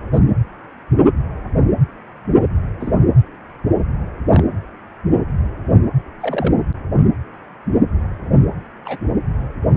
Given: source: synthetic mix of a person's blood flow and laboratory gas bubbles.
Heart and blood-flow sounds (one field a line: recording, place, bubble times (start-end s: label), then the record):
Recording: Doppler ultrasound of blood flow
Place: precordium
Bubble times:
0.12-0.20 s: bubbles
2.80-2.94 s: bubbles
4.30-4.44 s: bubbles
6.20-6.55 s: bubbles
8.85-8.98 s: bubbles
From the record:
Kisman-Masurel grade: 122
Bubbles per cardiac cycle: 1 to 2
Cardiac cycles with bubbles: 10 to 50%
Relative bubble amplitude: moderate (0.250 to 0.450)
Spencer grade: 2 (many but less than half of the cardiac periods contain bubble signals, singularly or in groups)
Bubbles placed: anywhere in the cardiac cycle